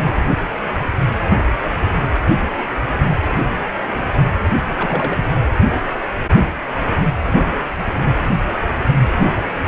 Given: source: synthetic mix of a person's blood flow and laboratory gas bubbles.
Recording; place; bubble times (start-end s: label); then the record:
Doppler ultrasound of blood flow; precordium
4.76-5.21 s: bubbles
From the record:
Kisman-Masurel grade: 111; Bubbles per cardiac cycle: 1 to 2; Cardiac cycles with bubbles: 1 to 10%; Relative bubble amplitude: barely perceptible (0.100 to 0.250); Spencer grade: 1 (occasional bubble signal discernible with the cardiac motion signal, with majority of cardiac periods free of bubbles); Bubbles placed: anywhere in the cardiac cycle